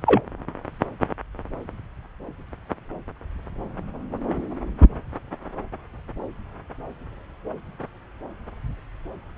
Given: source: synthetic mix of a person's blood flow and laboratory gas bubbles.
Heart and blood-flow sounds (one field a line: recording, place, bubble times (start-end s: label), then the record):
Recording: Doppler ultrasound of blood flow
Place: subclavian vein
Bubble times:
0.06-0.21 s: bubbles
From the record:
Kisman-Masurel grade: 113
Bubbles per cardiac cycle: 1 to 2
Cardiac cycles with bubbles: 1 to 10%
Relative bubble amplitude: loud (0.450 to 0.775)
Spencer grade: 1 (occasional bubble signal discernible with the cardiac motion signal, with majority of cardiac periods free of bubbles)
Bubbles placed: anywhere in the cardiac cycle